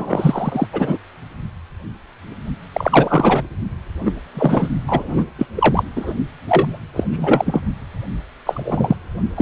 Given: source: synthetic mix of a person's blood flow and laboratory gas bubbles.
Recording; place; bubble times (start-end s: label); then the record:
Doppler ultrasound of blood flow; precordium
0.00-0.67 s: bubbles
0.73-0.98 s: bubbles
2.73-3.42 s: bubbles
4.04-4.12 s: bubbles
4.34-4.68 s: bubbles
4.88-5.26 s: bubbles
5.38-5.46 s: bubbles
5.55-5.83 s: bubbles
5.96-6.13 s: bubbles
6.47-6.80 s: bubbles
6.93-7.61 s: bubbles
8.46-8.96 s: bubbles
9.36-9.42 s: bubbles
From the record:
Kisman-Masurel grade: 233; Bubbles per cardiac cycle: several, 3 to 8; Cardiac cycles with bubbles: 50 to 99%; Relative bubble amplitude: loud (0.450 to 0.775); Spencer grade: 3 (all of the cardiac periods contain showers or single bubble signals, but not dominating or overriding the cardiac motion signals); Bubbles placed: only in the low amplitude regions of the cardiac cycle